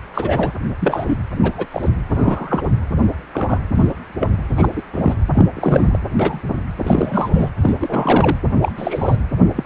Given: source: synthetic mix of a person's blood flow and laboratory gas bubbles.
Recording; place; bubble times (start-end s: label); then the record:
Doppler ultrasound of blood flow; precordium
0.13-0.53 s: bubbles
0.80-1.18 s: bubbles
1.42-1.66 s: bubbles
1.71-1.90 s: bubbles
2.08-2.62 s: bubbles
3.33-3.61 s: bubbles
3.75-3.88 s: bubbles
4.20-4.31 s: bubbles
4.56-4.82 s: bubbles
4.92-5.14 s: bubbles
5.33-5.46 s: bubbles
5.55-5.99 s: bubbles
6.04-6.41 s: bubbles
6.77-7.29 s: bubbles
7.32-7.50 s: bubbles
7.61-7.74 s: bubbles
7.80-8.37 s: bubbles
8.62-8.72 s: bubbles
8.77-9.16 s: bubbles
9.55-9.63 s: bubbles
From the record:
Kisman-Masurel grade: 242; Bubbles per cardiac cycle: several, 3 to 8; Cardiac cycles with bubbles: 100%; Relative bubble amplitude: moderate (0.250 to 0.450); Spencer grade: 3 (all of the cardiac periods contain showers or single bubble signals, but not dominating or overriding the cardiac motion signals); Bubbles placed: anywhere in the cardiac cycle